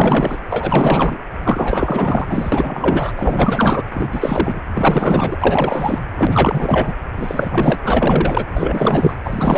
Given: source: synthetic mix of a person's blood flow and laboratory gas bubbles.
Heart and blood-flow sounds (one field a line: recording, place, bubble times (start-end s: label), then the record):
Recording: Doppler ultrasound of blood flow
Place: precordium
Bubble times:
0.00-0.41 s: bubbles
0.49-1.18 s: bubbles
1.44-3.12 s: bubbles
3.16-3.83 s: bubbles
3.93-4.59 s: bubbles
4.72-5.37 s: bubbles
5.42-6.02 s: bubbles
6.15-6.95 s: bubbles
7.16-7.79 s: bubbles
7.83-8.46 s: bubbles
8.54-9.15 s: bubbles
9.23-9.58 s: bubbles
From the record:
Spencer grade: 4 (maximum detectable bubble signal sounding continuously throughout systole and diastole of every cardiac period, and overriding the amplitude of the normal cardiac signals)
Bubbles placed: anywhere in the cardiac cycle